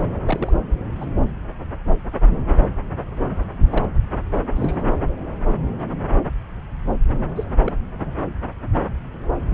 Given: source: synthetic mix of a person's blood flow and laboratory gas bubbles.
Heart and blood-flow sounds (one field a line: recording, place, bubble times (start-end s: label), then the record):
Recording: Doppler ultrasound of blood flow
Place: subclavian vein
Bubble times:
0.00-0.02 s: bubbles
0.25-0.52 s: bubbles
1.00-1.05 s: bubbles
3.70-3.85 s: bubbles
4.56-4.84 s: bubbles
7.36-7.44 s: bubbles
7.65-7.73 s: bubbles
8.05-8.13 s: bubbles
From the record:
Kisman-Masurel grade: 121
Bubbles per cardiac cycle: 1 to 2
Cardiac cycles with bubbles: 10 to 50%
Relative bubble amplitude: barely perceptible (0.100 to 0.250)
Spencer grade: 2 (many but less than half of the cardiac periods contain bubble signals, singularly or in groups)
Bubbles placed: anywhere in the cardiac cycle